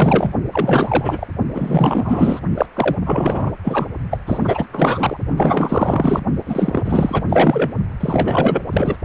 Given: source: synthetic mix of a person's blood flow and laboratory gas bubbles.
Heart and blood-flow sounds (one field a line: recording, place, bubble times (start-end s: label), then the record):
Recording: Doppler ultrasound of blood flow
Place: precordium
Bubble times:
0.00-0.30 s: bubbles
0.53-1.27 s: bubbles
1.55-2.40 s: bubbles
2.56-2.66 s: bubbles
2.74-2.95 s: bubbles
3.05-3.52 s: bubbles
3.63-3.86 s: bubbles
4.10-4.18 s: bubbles
4.26-4.66 s: bubbles
4.71-5.17 s: bubbles
5.37-6.20 s: bubbles
6.46-7.25 s: bubbles
7.29-7.71 s: bubbles
7.99-8.63 s: bubbles
8.72-8.96 s: bubbles
From the record:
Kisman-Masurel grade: 444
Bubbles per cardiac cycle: continuous sound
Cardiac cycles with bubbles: 100%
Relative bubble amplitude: maximal (0.775 to 0.999)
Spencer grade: 4 (maximum detectable bubble signal sounding continuously throughout systole and diastole of every cardiac period, and overriding the amplitude of the normal cardiac signals)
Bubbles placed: only in the low amplitude regions of the cardiac cycle